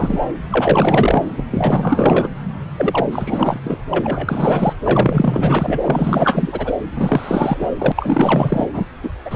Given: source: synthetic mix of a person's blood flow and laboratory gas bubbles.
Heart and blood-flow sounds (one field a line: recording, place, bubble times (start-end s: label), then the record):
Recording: Doppler ultrasound of blood flow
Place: subclavian vein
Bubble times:
0.00-0.21 s: bubbles
0.50-1.23 s: bubbles
1.37-1.44 s: bubbles
1.50-2.28 s: bubbles
2.77-3.06 s: bubbles
3.11-3.78 s: bubbles
3.90-4.73 s: bubbles
4.84-6.72 s: bubbles
6.96-7.70 s: bubbles
7.79-7.92 s: bubbles
7.96-8.69 s: bubbles
8.73-8.85 s: bubbles
9.03-9.10 s: bubbles
9.24-9.36 s: bubbles
From the record:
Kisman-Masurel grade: 444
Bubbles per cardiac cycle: continuous sound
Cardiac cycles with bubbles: 100%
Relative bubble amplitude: maximal (0.775 to 0.999)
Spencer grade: 4 (maximum detectable bubble signal sounding continuously throughout systole and diastole of every cardiac period, and overriding the amplitude of the normal cardiac signals)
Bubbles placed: anywhere in the cardiac cycle